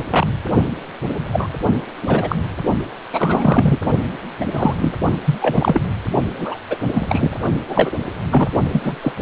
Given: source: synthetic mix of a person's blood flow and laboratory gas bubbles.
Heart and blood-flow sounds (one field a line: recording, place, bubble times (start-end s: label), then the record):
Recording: Doppler ultrasound of blood flow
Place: precordium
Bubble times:
0.11-0.26 s: bubbles
1.32-1.48 s: bubbles
2.01-2.35 s: bubbles
3.12-3.78 s: bubbles
4.40-4.45 s: bubbles
4.51-4.75 s: bubbles
4.78-4.94 s: bubbles
5.25-5.39 s: bubbles
5.41-5.81 s: bubbles
6.33-6.57 s: bubbles
6.70-6.78 s: bubbles
6.93-7.38 s: bubbles
7.68-7.91 s: bubbles
8.30-8.47 s: bubbles
8.71-8.96 s: bubbles
9.02-9.12 s: bubbles
From the record:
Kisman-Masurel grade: 243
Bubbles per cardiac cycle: several, 3 to 8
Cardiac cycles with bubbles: 100%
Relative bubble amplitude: loud (0.450 to 0.775)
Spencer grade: 3 (all of the cardiac periods contain showers or single bubble signals, but not dominating or overriding the cardiac motion signals)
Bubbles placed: only in the low amplitude regions of the cardiac cycle